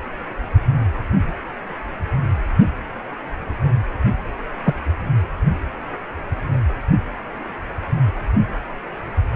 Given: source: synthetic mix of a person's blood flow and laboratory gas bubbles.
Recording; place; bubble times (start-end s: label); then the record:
Doppler ultrasound of blood flow; precordium
4.65-4.74 s: bubbles
From the record:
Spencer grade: 1 (occasional bubble signal discernible with the cardiac motion signal, with majority of cardiac periods free of bubbles); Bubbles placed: anywhere in the cardiac cycle